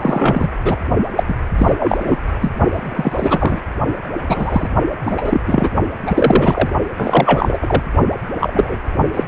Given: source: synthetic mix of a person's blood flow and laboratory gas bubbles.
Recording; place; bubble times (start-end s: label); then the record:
Doppler ultrasound of blood flow; precordium
0.00-0.55 s: bubbles
0.65-0.75 s: bubbles
1.16-1.23 s: bubbles
1.27-1.34 s: bubbles
1.58-1.73 s: bubbles
1.79-2.19 s: bubbles
2.42-2.52 s: bubbles
2.70-3.59 s: bubbles
4.26-4.68 s: bubbles
5.06-5.41 s: bubbles
5.47-5.69 s: bubbles
6.06-6.70 s: bubbles
6.97-7.83 s: bubbles
8.39-8.78 s: bubbles
9.13-9.23 s: bubbles
From the record:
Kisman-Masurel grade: 243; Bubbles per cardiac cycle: several, 3 to 8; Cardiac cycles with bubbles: 100%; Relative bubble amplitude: loud (0.450 to 0.775); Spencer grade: 3 (all of the cardiac periods contain showers or single bubble signals, but not dominating or overriding the cardiac motion signals); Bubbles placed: only in the low amplitude regions of the cardiac cycle